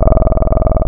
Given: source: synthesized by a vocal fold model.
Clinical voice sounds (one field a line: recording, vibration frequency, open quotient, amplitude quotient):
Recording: sustained vowel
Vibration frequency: 20 Hz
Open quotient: 0.4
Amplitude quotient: 1.3